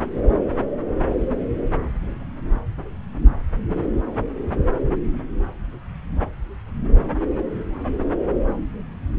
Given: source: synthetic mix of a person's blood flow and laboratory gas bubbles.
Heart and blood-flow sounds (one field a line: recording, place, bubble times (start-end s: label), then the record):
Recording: Doppler ultrasound of blood flow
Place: subclavian vein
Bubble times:
1.20-1.26 s: bubbles
From the record:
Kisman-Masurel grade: 111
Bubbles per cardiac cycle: 1 to 2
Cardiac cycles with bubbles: 1 to 10%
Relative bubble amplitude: barely perceptible (0.100 to 0.250)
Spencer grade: 1 (occasional bubble signal discernible with the cardiac motion signal, with majority of cardiac periods free of bubbles)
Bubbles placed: anywhere in the cardiac cycle